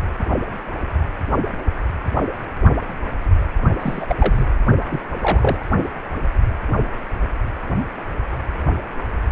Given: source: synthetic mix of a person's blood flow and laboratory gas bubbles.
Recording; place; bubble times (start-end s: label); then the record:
Doppler ultrasound of blood flow; precordium
3.80-4.05 s: bubbles
4.08-4.15 s: bubbles
4.18-4.45 s: bubbles
4.89-4.99 s: bubbles
5.20-5.67 s: bubbles
From the record:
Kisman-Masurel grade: 222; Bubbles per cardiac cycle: several, 3 to 8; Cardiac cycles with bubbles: 10 to 50%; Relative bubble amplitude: moderate (0.250 to 0.450); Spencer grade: 2 (many but less than half of the cardiac periods contain bubble signals, singularly or in groups); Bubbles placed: only in the low amplitude regions of the cardiac cycle